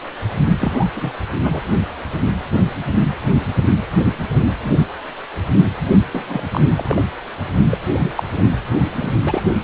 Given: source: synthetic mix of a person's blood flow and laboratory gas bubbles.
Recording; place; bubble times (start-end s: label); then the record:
Doppler ultrasound of blood flow; precordium
0.60-0.88 s: bubbles
0.94-1.12 s: bubbles
1.32-1.38 s: bubbles
1.44-1.61 s: bubbles
6.13-6.42 s: bubbles
6.51-6.61 s: bubbles
6.77-7.02 s: bubbles
7.70-7.78 s: bubbles
7.92-8.11 s: bubbles
8.17-8.23 s: bubbles
8.32-8.51 s: bubbles
8.95-9.16 s: bubbles
9.25-9.41 s: bubbles
From the record:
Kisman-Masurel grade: 232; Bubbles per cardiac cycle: several, 3 to 8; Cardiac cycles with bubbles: 50 to 99%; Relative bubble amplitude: moderate (0.250 to 0.450); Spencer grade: 3 (all of the cardiac periods contain showers or single bubble signals, but not dominating or overriding the cardiac motion signals); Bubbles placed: only in the low amplitude regions of the cardiac cycle